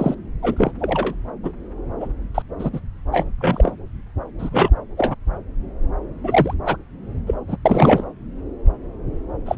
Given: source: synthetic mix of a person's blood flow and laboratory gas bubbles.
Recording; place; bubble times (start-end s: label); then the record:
Doppler ultrasound of blood flow; subclavian vein
0.00-0.14 s: bubbles
0.42-0.71 s: bubbles
0.79-1.15 s: bubbles
1.43-1.52 s: bubbles
2.00-2.08 s: bubbles
2.34-2.42 s: bubbles
2.58-2.70 s: bubbles
2.73-2.80 s: bubbles
3.11-3.25 s: bubbles
3.40-3.77 s: bubbles
4.38-4.71 s: bubbles
4.97-5.15 s: bubbles
6.24-6.54 s: bubbles
6.65-6.76 s: bubbles
7.26-7.34 s: bubbles
7.47-7.57 s: bubbles
7.65-8.04 s: bubbles
9.45-9.55 s: bubbles
From the record:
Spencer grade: 3 (all of the cardiac periods contain showers or single bubble signals, but not dominating or overriding the cardiac motion signals); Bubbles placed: anywhere in the cardiac cycle